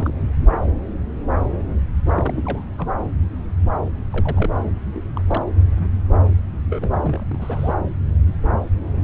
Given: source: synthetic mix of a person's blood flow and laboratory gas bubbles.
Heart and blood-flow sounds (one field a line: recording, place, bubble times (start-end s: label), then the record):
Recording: Doppler ultrasound of blood flow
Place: subclavian vein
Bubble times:
0.00-0.13 s: bubbles
0.52-0.56 s: bubbles
2.04-2.72 s: bubbles
2.78-2.87 s: bubbles
4.12-4.54 s: bubbles
4.61-4.72 s: bubbles
4.93-5.02 s: bubbles
5.16-5.21 s: bubbles
5.27-5.42 s: bubbles
6.69-6.93 s: bubbles
7.04-7.74 s: bubbles
From the record:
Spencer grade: 2 (many but less than half of the cardiac periods contain bubble signals, singularly or in groups)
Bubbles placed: anywhere in the cardiac cycle